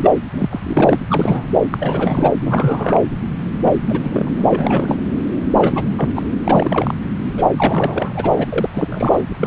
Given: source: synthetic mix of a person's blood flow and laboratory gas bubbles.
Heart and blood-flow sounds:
Doppler ultrasound of blood flow; subclavian vein
0.00-0.11 s: bubbles
0.30-0.60 s: bubbles
0.63-0.98 s: bubbles
1.08-1.52 s: bubbles
1.54-1.62 s: bubbles
1.74-2.32 s: bubbles
2.40-3.00 s: bubbles
3.65-3.71 s: bubbles
3.85-4.30 s: bubbles
4.37-4.44 s: bubbles
4.47-4.98 s: bubbles
5.55-5.84 s: bubbles
5.97-6.10 s: bubbles
6.15-6.22 s: bubbles
6.44-6.94 s: bubbles
7.38-7.45 s: bubbles
7.56-8.46 s: bubbles
8.53-8.70 s: bubbles
8.73-9.21 s: bubbles
9.28-9.47 s: bubbles
From the record:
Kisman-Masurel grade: 342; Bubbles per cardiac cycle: rolling drumbeat, 9 or more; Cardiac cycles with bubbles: 100%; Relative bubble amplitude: moderate (0.250 to 0.450); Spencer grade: 3 (all of the cardiac periods contain showers or single bubble signals, but not dominating or overriding the cardiac motion signals); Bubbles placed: anywhere in the cardiac cycle

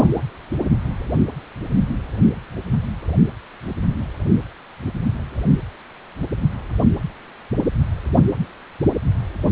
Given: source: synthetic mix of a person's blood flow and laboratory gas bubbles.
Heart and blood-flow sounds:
Doppler ultrasound of blood flow; precordium
0.00-0.10 s: bubbles
From the record:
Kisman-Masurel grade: 212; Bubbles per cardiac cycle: several, 3 to 8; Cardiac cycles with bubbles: 1 to 10%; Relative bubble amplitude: moderate (0.250 to 0.450); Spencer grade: 1 (occasional bubble signal discernible with the cardiac motion signal, with majority of cardiac periods free of bubbles); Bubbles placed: anywhere in the cardiac cycle

